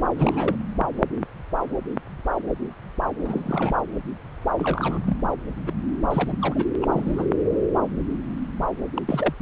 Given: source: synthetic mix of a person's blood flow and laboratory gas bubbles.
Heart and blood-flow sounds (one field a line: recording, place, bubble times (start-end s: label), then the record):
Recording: Doppler ultrasound of blood flow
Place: subclavian vein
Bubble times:
0.18-0.56 s: bubbles
3.24-3.82 s: bubbles
4.58-5.17 s: bubbles
5.66-5.72 s: bubbles
6.11-6.37 s: bubbles
6.42-6.64 s: bubbles
6.82-6.87 s: bubbles
6.92-7.27 s: bubbles
8.96-9.01 s: bubbles
9.07-9.34 s: bubbles
From the record:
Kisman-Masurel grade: 221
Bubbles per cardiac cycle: several, 3 to 8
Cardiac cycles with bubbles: 10 to 50%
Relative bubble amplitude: barely perceptible (0.100 to 0.250)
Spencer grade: 2 (many but less than half of the cardiac periods contain bubble signals, singularly or in groups)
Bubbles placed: anywhere in the cardiac cycle